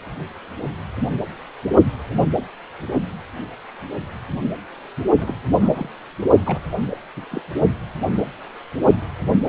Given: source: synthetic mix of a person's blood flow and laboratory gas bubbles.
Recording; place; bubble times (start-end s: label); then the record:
Doppler ultrasound of blood flow; precordium
5.20-5.35 s: bubbles
5.52-5.89 s: bubbles
6.46-6.60 s: bubbles
6.89-6.98 s: bubbles
7.16-7.25 s: bubbles
7.31-7.41 s: bubbles
From the record:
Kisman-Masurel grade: 221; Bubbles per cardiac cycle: several, 3 to 8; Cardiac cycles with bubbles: 10 to 50%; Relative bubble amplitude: barely perceptible (0.100 to 0.250); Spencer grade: 2 (many but less than half of the cardiac periods contain bubble signals, singularly or in groups); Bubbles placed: only in the low amplitude regions of the cardiac cycle